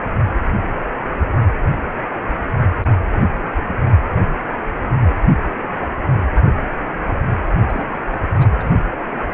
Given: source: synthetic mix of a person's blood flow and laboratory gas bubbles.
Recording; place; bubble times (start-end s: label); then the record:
Doppler ultrasound of blood flow; precordium
7.68-7.84 s: bubbles
8.12-8.20 s: bubbles
8.34-8.46 s: bubbles
8.48-8.77 s: bubbles
From the record:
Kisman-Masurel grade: 211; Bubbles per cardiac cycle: several, 3 to 8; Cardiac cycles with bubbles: 1 to 10%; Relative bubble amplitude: barely perceptible (0.100 to 0.250); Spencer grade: 1 (occasional bubble signal discernible with the cardiac motion signal, with majority of cardiac periods free of bubbles); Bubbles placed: only in the low amplitude regions of the cardiac cycle